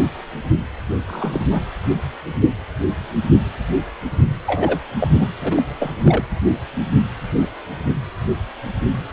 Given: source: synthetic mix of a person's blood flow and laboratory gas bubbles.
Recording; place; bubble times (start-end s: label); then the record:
Doppler ultrasound of blood flow; precordium
1.07-1.49 s: bubbles
1.51-1.61 s: bubbles
4.46-4.79 s: bubbles
4.98-5.08 s: bubbles
5.13-5.29 s: bubbles
5.40-5.62 s: bubbles
5.79-5.94 s: bubbles
6.04-6.25 s: bubbles
From the record:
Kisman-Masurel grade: 222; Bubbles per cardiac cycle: several, 3 to 8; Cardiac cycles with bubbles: 10 to 50%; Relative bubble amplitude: moderate (0.250 to 0.450); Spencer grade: 2 (many but less than half of the cardiac periods contain bubble signals, singularly or in groups); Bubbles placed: anywhere in the cardiac cycle